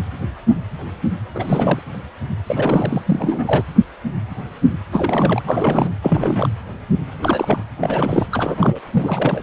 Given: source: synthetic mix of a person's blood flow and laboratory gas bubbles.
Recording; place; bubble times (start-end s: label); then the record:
Doppler ultrasound of blood flow; precordium
1.35-1.80 s: bubbles
2.46-3.02 s: bubbles
3.06-3.63 s: bubbles
4.91-5.43 s: bubbles
5.46-5.90 s: bubbles
6.02-6.48 s: bubbles
7.22-7.64 s: bubbles
7.78-8.26 s: bubbles
8.32-8.79 s: bubbles
8.92-9.43 s: bubbles
From the record:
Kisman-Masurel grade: 332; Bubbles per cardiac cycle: rolling drumbeat, 9 or more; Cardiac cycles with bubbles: 50 to 99%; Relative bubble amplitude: moderate (0.250 to 0.450); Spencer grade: 3 (all of the cardiac periods contain showers or single bubble signals, but not dominating or overriding the cardiac motion signals); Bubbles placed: anywhere in the cardiac cycle